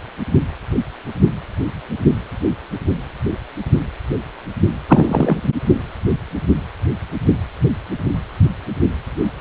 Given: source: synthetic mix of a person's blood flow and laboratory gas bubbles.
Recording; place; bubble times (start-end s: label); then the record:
Doppler ultrasound of blood flow; precordium
4.88-5.37 s: bubbles
From the record:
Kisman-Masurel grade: 123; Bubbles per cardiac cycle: 1 to 2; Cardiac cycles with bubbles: 10 to 50%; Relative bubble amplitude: loud (0.450 to 0.775); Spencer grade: 2 (many but less than half of the cardiac periods contain bubble signals, singularly or in groups); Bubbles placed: only in the low amplitude regions of the cardiac cycle